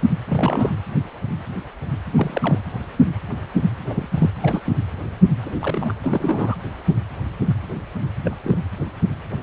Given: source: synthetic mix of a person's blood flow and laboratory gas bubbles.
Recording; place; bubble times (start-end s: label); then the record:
Doppler ultrasound of blood flow; precordium
0.28-0.75 s: bubbles
2.16-2.59 s: bubbles
3.88-4.07 s: bubbles
4.14-4.30 s: bubbles
4.42-4.60 s: bubbles
4.65-4.81 s: bubbles
5.46-5.94 s: bubbles
6.03-6.54 s: bubbles
8.24-8.36 s: bubbles
8.43-8.57 s: bubbles
From the record:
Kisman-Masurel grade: 222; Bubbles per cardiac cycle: several, 3 to 8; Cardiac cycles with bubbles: 10 to 50%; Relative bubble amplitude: moderate (0.250 to 0.450); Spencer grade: 2 (many but less than half of the cardiac periods contain bubble signals, singularly or in groups); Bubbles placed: anywhere in the cardiac cycle